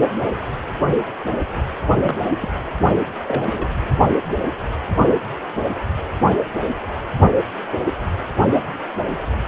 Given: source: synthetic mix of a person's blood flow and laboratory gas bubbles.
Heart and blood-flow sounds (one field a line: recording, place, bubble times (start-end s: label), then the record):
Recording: Doppler ultrasound of blood flow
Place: precordium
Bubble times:
2.02-2.18 s: bubbles
2.41-2.49 s: bubbles
3.27-3.67 s: bubbles
From the record:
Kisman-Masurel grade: 122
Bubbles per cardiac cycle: 1 to 2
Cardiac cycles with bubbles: 10 to 50%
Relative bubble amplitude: moderate (0.250 to 0.450)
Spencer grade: 2 (many but less than half of the cardiac periods contain bubble signals, singularly or in groups)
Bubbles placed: only in the low amplitude regions of the cardiac cycle